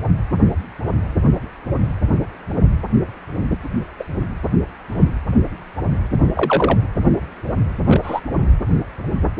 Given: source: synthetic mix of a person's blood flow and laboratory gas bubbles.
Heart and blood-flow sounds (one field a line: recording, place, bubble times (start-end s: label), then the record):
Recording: Doppler ultrasound of blood flow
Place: precordium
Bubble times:
4.00-4.04 s: bubbles
4.92-5.10 s: bubbles
6.35-6.77 s: bubbles
7.88-8.00 s: bubbles
8.04-8.21 s: bubbles
From the record:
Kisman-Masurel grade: 122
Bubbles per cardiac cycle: 1 to 2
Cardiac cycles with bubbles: 10 to 50%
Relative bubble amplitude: moderate (0.250 to 0.450)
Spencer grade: 2 (many but less than half of the cardiac periods contain bubble signals, singularly or in groups)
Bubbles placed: anywhere in the cardiac cycle